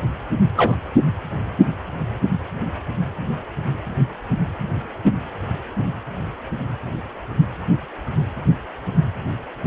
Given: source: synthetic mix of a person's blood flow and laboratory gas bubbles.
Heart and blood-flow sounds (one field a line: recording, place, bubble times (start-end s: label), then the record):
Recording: Doppler ultrasound of blood flow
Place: precordium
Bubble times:
0.56-0.75 s: bubbles
From the record:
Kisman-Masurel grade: 113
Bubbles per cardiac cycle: 1 to 2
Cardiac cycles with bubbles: 1 to 10%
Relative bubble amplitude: loud (0.450 to 0.775)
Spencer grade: 1 (occasional bubble signal discernible with the cardiac motion signal, with majority of cardiac periods free of bubbles)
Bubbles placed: anywhere in the cardiac cycle